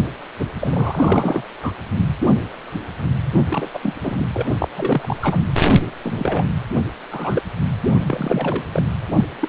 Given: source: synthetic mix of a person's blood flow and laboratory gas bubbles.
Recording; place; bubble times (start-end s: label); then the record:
Doppler ultrasound of blood flow; precordium
0.39-0.46 s: bubbles
0.60-1.43 s: bubbles
1.62-1.72 s: bubbles
3.33-3.68 s: bubbles
3.73-3.79 s: bubbles
3.82-3.94 s: bubbles
4.02-4.28 s: bubbles
4.33-4.56 s: bubbles
4.58-5.16 s: bubbles
5.21-5.42 s: bubbles
6.03-6.44 s: bubbles
7.11-7.43 s: bubbles
7.84-7.93 s: bubbles
8.00-8.65 s: bubbles
8.72-8.83 s: bubbles
9.12-9.25 s: bubbles
9.39-9.49 s: bubbles
From the record:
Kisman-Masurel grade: 332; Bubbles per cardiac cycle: rolling drumbeat, 9 or more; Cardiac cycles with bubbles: 50 to 99%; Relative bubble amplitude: moderate (0.250 to 0.450); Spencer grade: 3 (all of the cardiac periods contain showers or single bubble signals, but not dominating or overriding the cardiac motion signals); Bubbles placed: anywhere in the cardiac cycle